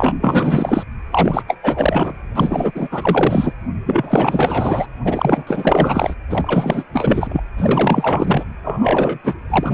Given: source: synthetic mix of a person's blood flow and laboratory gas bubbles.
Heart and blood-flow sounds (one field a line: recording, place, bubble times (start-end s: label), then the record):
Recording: Doppler ultrasound of blood flow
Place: precordium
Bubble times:
0.00-0.13 s: bubbles
0.21-0.83 s: bubbles
1.11-1.43 s: bubbles
1.48-1.57 s: bubbles
1.63-2.14 s: bubbles
2.34-2.71 s: bubbles
2.75-2.88 s: bubbles
2.91-3.53 s: bubbles
3.85-4.87 s: bubbles
5.04-5.44 s: bubbles
5.46-6.15 s: bubbles
6.29-6.84 s: bubbles
6.93-7.40 s: bubbles
7.57-8.44 s: bubbles
8.64-9.19 s: bubbles
9.24-9.34 s: bubbles
9.50-9.74 s: bubbles
From the record:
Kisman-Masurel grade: 444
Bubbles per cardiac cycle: continuous sound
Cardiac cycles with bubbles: 100%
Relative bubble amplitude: maximal (0.775 to 0.999)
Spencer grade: 4 (maximum detectable bubble signal sounding continuously throughout systole and diastole of every cardiac period, and overriding the amplitude of the normal cardiac signals)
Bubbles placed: anywhere in the cardiac cycle